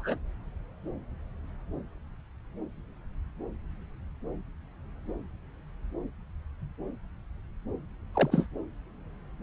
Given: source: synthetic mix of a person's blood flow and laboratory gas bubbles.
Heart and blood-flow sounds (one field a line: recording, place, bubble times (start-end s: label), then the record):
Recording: Doppler ultrasound of blood flow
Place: subclavian vein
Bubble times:
0.00-0.15 s: bubbles
8.14-8.46 s: bubbles
From the record:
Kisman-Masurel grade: 121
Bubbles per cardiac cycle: 1 to 2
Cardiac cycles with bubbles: 10 to 50%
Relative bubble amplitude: barely perceptible (0.100 to 0.250)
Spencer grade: 2 (many but less than half of the cardiac periods contain bubble signals, singularly or in groups)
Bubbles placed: anywhere in the cardiac cycle